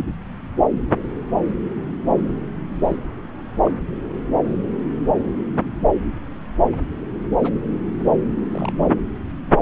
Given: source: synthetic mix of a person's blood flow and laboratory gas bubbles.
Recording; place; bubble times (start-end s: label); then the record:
Doppler ultrasound of blood flow; subclavian vein
2.83-2.96 s: bubbles
3.65-3.71 s: bubbles
6.72-6.76 s: bubbles
7.43-7.53 s: bubbles
8.52-8.87 s: bubbles
From the record:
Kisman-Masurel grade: 121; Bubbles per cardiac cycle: 1 to 2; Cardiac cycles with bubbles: 10 to 50%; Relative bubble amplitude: barely perceptible (0.100 to 0.250); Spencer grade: 2 (many but less than half of the cardiac periods contain bubble signals, singularly or in groups); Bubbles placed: anywhere in the cardiac cycle